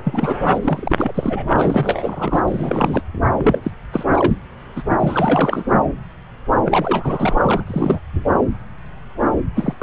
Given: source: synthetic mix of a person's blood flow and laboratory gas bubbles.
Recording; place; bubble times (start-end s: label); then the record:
Doppler ultrasound of blood flow; subclavian vein
0.04-0.38 s: bubbles
0.45-0.58 s: bubbles
0.62-1.47 s: bubbles
1.53-2.44 s: bubbles
2.48-3.02 s: bubbles
3.37-3.71 s: bubbles
3.92-4.04 s: bubbles
4.12-4.39 s: bubbles
4.76-4.83 s: bubbles
4.89-4.98 s: bubbles
5.00-5.64 s: bubbles
6.66-7.36 s: bubbles
7.43-7.64 s: bubbles
7.67-7.99 s: bubbles
9.55-9.74 s: bubbles
9.79-9.83 s: bubbles
From the record:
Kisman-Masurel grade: 333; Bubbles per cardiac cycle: rolling drumbeat, 9 or more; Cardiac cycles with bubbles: 50 to 99%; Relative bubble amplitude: loud (0.450 to 0.775); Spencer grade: 3 (all of the cardiac periods contain showers or single bubble signals, but not dominating or overriding the cardiac motion signals); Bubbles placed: anywhere in the cardiac cycle